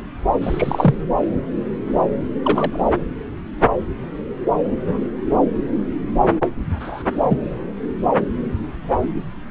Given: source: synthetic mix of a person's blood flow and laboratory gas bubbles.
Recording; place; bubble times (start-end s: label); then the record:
Doppler ultrasound of blood flow; subclavian vein
0.41-0.94 s: bubbles
2.43-2.83 s: bubbles
6.80-7.03 s: bubbles
7.12-7.38 s: bubbles
From the record:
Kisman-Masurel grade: 123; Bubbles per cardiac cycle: 1 to 2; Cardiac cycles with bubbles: 10 to 50%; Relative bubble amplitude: loud (0.450 to 0.775); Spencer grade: 2 (many but less than half of the cardiac periods contain bubble signals, singularly or in groups); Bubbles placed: anywhere in the cardiac cycle